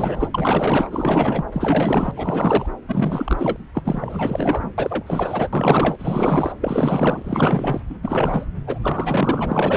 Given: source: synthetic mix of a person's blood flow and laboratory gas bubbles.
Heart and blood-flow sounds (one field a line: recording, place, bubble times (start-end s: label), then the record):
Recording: Doppler ultrasound of blood flow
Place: subclavian vein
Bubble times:
0.00-0.28 s: bubbles
0.34-1.44 s: bubbles
1.52-2.12 s: bubbles
2.17-2.66 s: bubbles
2.88-3.58 s: bubbles
3.74-4.72 s: bubbles
4.78-5.48 s: bubbles
5.52-6.52 s: bubbles
6.61-7.81 s: bubbles
7.89-7.96 s: bubbles
8.03-8.46 s: bubbles
8.66-8.79 s: bubbles
8.81-9.77 s: bubbles
From the record:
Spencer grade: 4 (maximum detectable bubble signal sounding continuously throughout systole and diastole of every cardiac period, and overriding the amplitude of the normal cardiac signals)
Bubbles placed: anywhere in the cardiac cycle